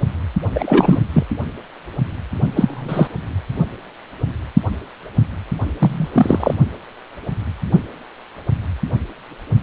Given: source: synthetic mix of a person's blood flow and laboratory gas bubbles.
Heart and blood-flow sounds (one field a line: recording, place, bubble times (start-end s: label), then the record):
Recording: Doppler ultrasound of blood flow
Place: precordium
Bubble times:
0.54-0.99 s: bubbles
1.12-1.23 s: bubbles
2.55-3.07 s: bubbles
5.79-6.09 s: bubbles
6.13-6.54 s: bubbles
From the record:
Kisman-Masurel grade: 223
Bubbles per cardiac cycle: several, 3 to 8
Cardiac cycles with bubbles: 10 to 50%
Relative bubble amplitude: loud (0.450 to 0.775)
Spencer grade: 2 (many but less than half of the cardiac periods contain bubble signals, singularly or in groups)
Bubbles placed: only in the low amplitude regions of the cardiac cycle